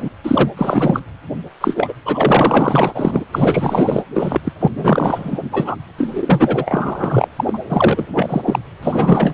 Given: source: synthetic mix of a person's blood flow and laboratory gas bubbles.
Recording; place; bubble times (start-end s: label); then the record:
Doppler ultrasound of blood flow; precordium
0.00-0.09 s: bubbles
0.23-0.49 s: bubbles
0.57-1.01 s: bubbles
1.60-1.94 s: bubbles
2.05-3.25 s: bubbles
3.33-4.03 s: bubbles
4.14-4.41 s: bubbles
4.44-4.52 s: bubbles
4.60-4.68 s: bubbles
4.76-5.40 s: bubbles
5.52-5.76 s: bubbles
5.98-7.28 s: bubbles
7.36-7.59 s: bubbles
7.69-8.06 s: bubbles
8.13-8.42 s: bubbles
8.45-8.59 s: bubbles
8.83-9.34 s: bubbles
From the record:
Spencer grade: 4 (maximum detectable bubble signal sounding continuously throughout systole and diastole of every cardiac period, and overriding the amplitude of the normal cardiac signals); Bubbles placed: anywhere in the cardiac cycle